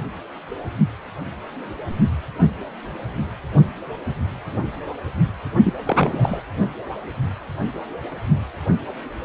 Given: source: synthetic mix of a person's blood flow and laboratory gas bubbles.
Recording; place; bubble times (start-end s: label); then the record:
Doppler ultrasound of blood flow; precordium
5.64-5.73 s: bubbles
5.86-6.42 s: bubbles
From the record:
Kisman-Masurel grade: 212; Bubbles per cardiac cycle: several, 3 to 8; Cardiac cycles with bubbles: 1 to 10%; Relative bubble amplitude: moderate (0.250 to 0.450); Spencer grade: 1 (occasional bubble signal discernible with the cardiac motion signal, with majority of cardiac periods free of bubbles); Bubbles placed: only in the low amplitude regions of the cardiac cycle